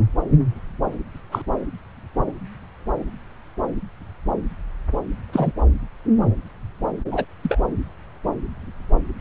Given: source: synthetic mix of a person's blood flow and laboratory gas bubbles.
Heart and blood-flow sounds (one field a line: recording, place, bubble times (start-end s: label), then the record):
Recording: Doppler ultrasound of blood flow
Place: subclavian vein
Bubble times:
1.31-1.42 s: bubbles
5.33-5.52 s: bubbles
7.08-7.25 s: bubbles
7.43-7.61 s: bubbles
From the record:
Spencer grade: 2 (many but less than half of the cardiac periods contain bubble signals, singularly or in groups)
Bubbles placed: anywhere in the cardiac cycle